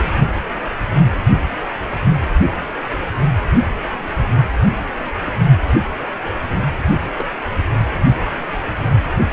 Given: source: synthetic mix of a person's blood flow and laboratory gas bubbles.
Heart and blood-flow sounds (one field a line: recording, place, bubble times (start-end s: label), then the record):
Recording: Doppler ultrasound of blood flow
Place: precordium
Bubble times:
7.18-7.25 s: bubbles
From the record:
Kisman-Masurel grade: 121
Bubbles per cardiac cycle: 1 to 2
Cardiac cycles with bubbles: 10 to 50%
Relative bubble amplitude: barely perceptible (0.100 to 0.250)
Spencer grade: 2 (many but less than half of the cardiac periods contain bubble signals, singularly or in groups)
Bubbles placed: only in the low amplitude regions of the cardiac cycle